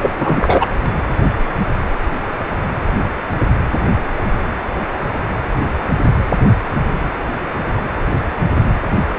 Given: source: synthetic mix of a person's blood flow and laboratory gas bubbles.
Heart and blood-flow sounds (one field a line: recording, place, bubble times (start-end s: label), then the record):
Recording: Doppler ultrasound of blood flow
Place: precordium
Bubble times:
0.00-0.10 s: bubbles
0.16-0.66 s: bubbles
From the record:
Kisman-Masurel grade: 213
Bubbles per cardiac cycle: several, 3 to 8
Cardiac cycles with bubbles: 1 to 10%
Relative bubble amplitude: loud (0.450 to 0.775)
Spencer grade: 1 (occasional bubble signal discernible with the cardiac motion signal, with majority of cardiac periods free of bubbles)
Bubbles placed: anywhere in the cardiac cycle